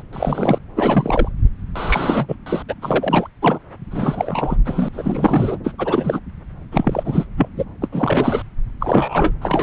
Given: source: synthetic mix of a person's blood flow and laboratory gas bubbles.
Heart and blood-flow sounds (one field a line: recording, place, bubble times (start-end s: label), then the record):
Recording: Doppler ultrasound of blood flow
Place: subclavian vein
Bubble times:
0.00-0.02 s: bubbles
0.12-0.58 s: bubbles
0.76-1.28 s: bubbles
1.75-2.36 s: bubbles
2.46-2.62 s: bubbles
2.68-2.74 s: bubbles
2.81-3.28 s: bubbles
3.42-3.59 s: bubbles
3.91-4.56 s: bubbles
4.65-4.88 s: bubbles
4.93-5.58 s: bubbles
5.63-5.73 s: bubbles
5.78-6.20 s: bubbles
6.71-7.26 s: bubbles
7.36-7.48 s: bubbles
7.56-7.64 s: bubbles
7.81-7.88 s: bubbles
7.92-8.42 s: bubbles
8.80-9.32 s: bubbles
9.41-9.63 s: bubbles
From the record:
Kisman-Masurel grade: 343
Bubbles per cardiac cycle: rolling drumbeat, 9 or more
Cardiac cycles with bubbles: 100%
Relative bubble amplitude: loud (0.450 to 0.775)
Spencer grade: 3 (all of the cardiac periods contain showers or single bubble signals, but not dominating or overriding the cardiac motion signals)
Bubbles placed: anywhere in the cardiac cycle